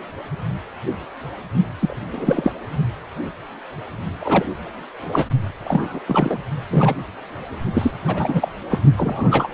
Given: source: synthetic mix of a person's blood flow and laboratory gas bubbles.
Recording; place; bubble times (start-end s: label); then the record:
Doppler ultrasound of blood flow; precordium
1.81-1.96 s: bubbles
2.12-2.52 s: bubbles
4.19-4.46 s: bubbles
5.12-5.25 s: bubbles
5.64-5.99 s: bubbles
6.06-6.39 s: bubbles
6.71-6.95 s: bubbles
7.74-7.91 s: bubbles
8.07-8.52 s: bubbles
8.69-8.80 s: bubbles
8.96-9.47 s: bubbles
From the record:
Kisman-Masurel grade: 223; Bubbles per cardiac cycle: several, 3 to 8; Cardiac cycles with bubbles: 10 to 50%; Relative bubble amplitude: loud (0.450 to 0.775); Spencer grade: 2 (many but less than half of the cardiac periods contain bubble signals, singularly or in groups); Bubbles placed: only in the low amplitude regions of the cardiac cycle